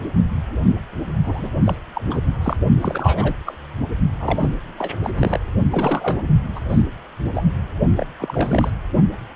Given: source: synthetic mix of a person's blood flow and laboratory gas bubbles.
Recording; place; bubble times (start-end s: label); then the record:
Doppler ultrasound of blood flow; precordium
1.24-1.49 s: bubbles
1.65-1.77 s: bubbles
1.95-2.01 s: bubbles
2.10-2.18 s: bubbles
2.42-2.57 s: bubbles
2.81-3.34 s: bubbles
3.46-3.57 s: bubbles
4.20-4.54 s: bubbles
4.78-4.91 s: bubbles
5.03-5.10 s: bubbles
5.18-5.39 s: bubbles
5.70-6.21 s: bubbles
6.55-6.61 s: bubbles
6.69-6.83 s: bubbles
7.34-7.46 s: bubbles
7.97-8.06 s: bubbles
8.19-8.70 s: bubbles
From the record:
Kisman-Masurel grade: 332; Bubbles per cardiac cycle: rolling drumbeat, 9 or more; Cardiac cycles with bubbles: 50 to 99%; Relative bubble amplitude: moderate (0.250 to 0.450); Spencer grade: 3 (all of the cardiac periods contain showers or single bubble signals, but not dominating or overriding the cardiac motion signals); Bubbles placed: only in the low amplitude regions of the cardiac cycle